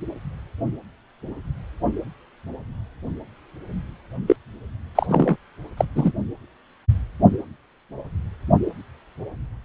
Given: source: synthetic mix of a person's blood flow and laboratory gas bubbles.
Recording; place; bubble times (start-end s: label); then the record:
Doppler ultrasound of blood flow; precordium
4.28-4.36 s: bubbles
4.95-5.37 s: bubbles
5.77-5.85 s: bubbles
5.95-6.12 s: bubbles
From the record:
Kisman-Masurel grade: 213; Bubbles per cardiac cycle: several, 3 to 8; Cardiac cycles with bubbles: 1 to 10%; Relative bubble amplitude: loud (0.450 to 0.775); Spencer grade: 1 (occasional bubble signal discernible with the cardiac motion signal, with majority of cardiac periods free of bubbles); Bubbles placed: only in the low amplitude regions of the cardiac cycle